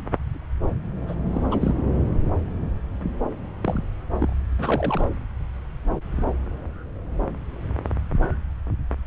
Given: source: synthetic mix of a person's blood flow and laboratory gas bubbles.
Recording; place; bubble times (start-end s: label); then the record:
Doppler ultrasound of blood flow; subclavian vein
1.07-1.15 s: bubbles
1.32-1.74 s: bubbles
3.61-3.84 s: bubbles
4.19-4.33 s: bubbles
4.58-5.08 s: bubbles
From the record:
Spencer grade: 2 (many but less than half of the cardiac periods contain bubble signals, singularly or in groups); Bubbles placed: anywhere in the cardiac cycle